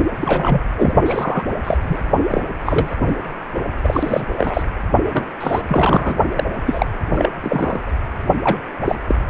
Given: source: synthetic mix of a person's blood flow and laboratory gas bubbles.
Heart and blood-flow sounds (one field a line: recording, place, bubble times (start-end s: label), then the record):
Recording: Doppler ultrasound of blood flow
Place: precordium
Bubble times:
0.20-0.61 s: bubbles
0.76-0.96 s: bubbles
1.04-1.46 s: bubbles
1.64-1.77 s: bubbles
1.83-1.97 s: bubbles
2.31-2.42 s: bubbles
2.65-2.95 s: bubbles
3.08-3.13 s: bubbles
3.82-4.25 s: bubbles
4.38-4.63 s: bubbles
5.12-5.34 s: bubbles
5.40-5.62 s: bubbles
5.67-6.14 s: bubbles
6.36-6.44 s: bubbles
6.66-6.86 s: bubbles
7.13-7.29 s: bubbles
7.41-7.80 s: bubbles
8.43-8.57 s: bubbles
8.84-8.96 s: bubbles
9.07-9.15 s: bubbles
From the record:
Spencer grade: 3 (all of the cardiac periods contain showers or single bubble signals, but not dominating or overriding the cardiac motion signals)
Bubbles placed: only in the low amplitude regions of the cardiac cycle